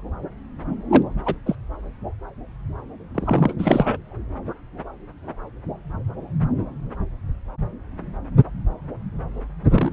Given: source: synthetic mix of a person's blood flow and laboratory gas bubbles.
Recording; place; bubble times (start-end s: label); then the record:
Doppler ultrasound of blood flow; subclavian vein
0.91-1.02 s: bubbles
1.25-1.35 s: bubbles
1.46-1.55 s: bubbles
3.15-3.54 s: bubbles
3.59-3.97 s: bubbles
9.70-9.93 s: bubbles
From the record:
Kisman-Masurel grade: 222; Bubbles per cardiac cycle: several, 3 to 8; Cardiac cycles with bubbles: 10 to 50%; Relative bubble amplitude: moderate (0.250 to 0.450); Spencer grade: 2 (many but less than half of the cardiac periods contain bubble signals, singularly or in groups); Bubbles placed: anywhere in the cardiac cycle